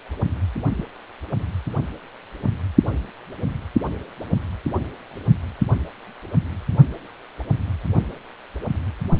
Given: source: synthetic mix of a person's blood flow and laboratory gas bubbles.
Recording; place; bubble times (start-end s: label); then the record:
Doppler ultrasound of blood flow; precordium
0.78-0.83 s: bubbles
From the record:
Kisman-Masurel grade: 111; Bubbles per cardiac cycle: 1 to 2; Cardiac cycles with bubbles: 1 to 10%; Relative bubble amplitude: barely perceptible (0.100 to 0.250); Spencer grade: 1 (occasional bubble signal discernible with the cardiac motion signal, with majority of cardiac periods free of bubbles); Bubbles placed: only in the low amplitude regions of the cardiac cycle